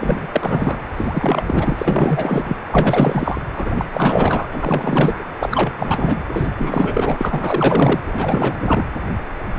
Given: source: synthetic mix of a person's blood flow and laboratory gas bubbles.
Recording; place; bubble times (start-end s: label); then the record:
Doppler ultrasound of blood flow; precordium
0.00-0.80 s: bubbles
0.96-1.43 s: bubbles
1.46-2.57 s: bubbles
2.69-3.41 s: bubbles
3.53-3.86 s: bubbles
3.92-4.46 s: bubbles
4.52-5.24 s: bubbles
5.39-5.74 s: bubbles
5.77-6.19 s: bubbles
6.28-8.01 s: bubbles
8.07-8.85 s: bubbles
9.56-9.58 s: bubbles
From the record:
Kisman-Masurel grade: 444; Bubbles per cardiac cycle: continuous sound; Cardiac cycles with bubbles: 100%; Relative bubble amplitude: maximal (0.775 to 0.999); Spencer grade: 4 (maximum detectable bubble signal sounding continuously throughout systole and diastole of every cardiac period, and overriding the amplitude of the normal cardiac signals); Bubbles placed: anywhere in the cardiac cycle